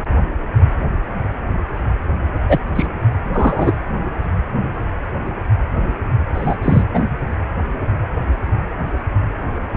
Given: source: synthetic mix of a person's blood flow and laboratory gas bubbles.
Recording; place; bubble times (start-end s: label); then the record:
Doppler ultrasound of blood flow; precordium
2.48-2.58 s: bubbles
2.75-2.86 s: bubbles
3.33-3.74 s: bubbles
6.33-6.56 s: bubbles
6.62-6.83 s: bubbles
6.94-7.07 s: bubbles
From the record:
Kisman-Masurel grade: 123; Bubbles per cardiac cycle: 1 to 2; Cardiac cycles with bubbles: 10 to 50%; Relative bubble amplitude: loud (0.450 to 0.775); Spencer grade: 2 (many but less than half of the cardiac periods contain bubble signals, singularly or in groups); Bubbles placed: anywhere in the cardiac cycle